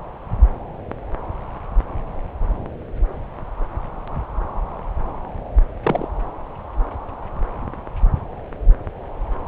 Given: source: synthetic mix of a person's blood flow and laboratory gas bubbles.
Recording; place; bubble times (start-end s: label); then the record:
Doppler ultrasound of blood flow; subclavian vein
5.83-6.08 s: bubbles
From the record:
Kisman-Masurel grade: 112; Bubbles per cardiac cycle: 1 to 2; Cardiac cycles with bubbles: 1 to 10%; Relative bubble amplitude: moderate (0.250 to 0.450); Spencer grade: 1 (occasional bubble signal discernible with the cardiac motion signal, with majority of cardiac periods free of bubbles); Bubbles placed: anywhere in the cardiac cycle